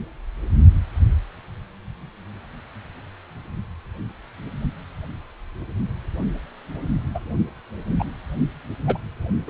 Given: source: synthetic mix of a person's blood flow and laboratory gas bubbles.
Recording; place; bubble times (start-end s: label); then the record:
Doppler ultrasound of blood flow; precordium
7.14-7.20 s: bubbles
7.99-8.04 s: bubbles
8.87-8.98 s: bubbles
9.47-9.50 s: bubbles
From the record:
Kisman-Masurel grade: 122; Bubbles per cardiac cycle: 1 to 2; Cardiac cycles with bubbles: 10 to 50%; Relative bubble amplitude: moderate (0.250 to 0.450); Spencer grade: 2 (many but less than half of the cardiac periods contain bubble signals, singularly or in groups); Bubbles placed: only in the low amplitude regions of the cardiac cycle